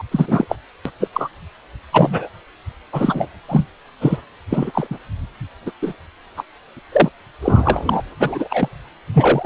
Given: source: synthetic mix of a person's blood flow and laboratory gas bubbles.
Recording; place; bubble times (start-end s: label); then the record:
Doppler ultrasound of blood flow; precordium
0.11-0.55 s: bubbles
0.85-0.90 s: bubbles
1.00-1.07 s: bubbles
1.12-1.29 s: bubbles
1.93-2.29 s: bubbles
2.92-3.28 s: bubbles
3.48-3.67 s: bubbles
4.00-4.17 s: bubbles
4.50-4.71 s: bubbles
4.74-4.87 s: bubbles
4.91-4.97 s: bubbles
5.66-5.71 s: bubbles
5.82-5.94 s: bubbles
6.37-6.43 s: bubbles
6.76-6.79 s: bubbles
6.92-7.10 s: bubbles
7.42-8.03 s: bubbles
8.20-8.69 s: bubbles
9.14-9.46 s: bubbles
From the record:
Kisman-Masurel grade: 243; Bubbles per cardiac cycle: several, 3 to 8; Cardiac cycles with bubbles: 100%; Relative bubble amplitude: loud (0.450 to 0.775); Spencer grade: 3 (all of the cardiac periods contain showers or single bubble signals, but not dominating or overriding the cardiac motion signals); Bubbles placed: anywhere in the cardiac cycle